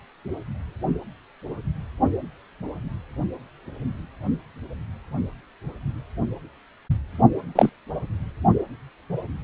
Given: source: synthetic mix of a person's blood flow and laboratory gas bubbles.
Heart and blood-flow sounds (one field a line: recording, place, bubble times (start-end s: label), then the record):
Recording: Doppler ultrasound of blood flow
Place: precordium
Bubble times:
7.55-7.70 s: bubbles
From the record:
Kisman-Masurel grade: 113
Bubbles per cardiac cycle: 1 to 2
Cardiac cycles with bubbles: 1 to 10%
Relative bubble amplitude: loud (0.450 to 0.775)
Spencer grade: 1 (occasional bubble signal discernible with the cardiac motion signal, with majority of cardiac periods free of bubbles)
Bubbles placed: only in the low amplitude regions of the cardiac cycle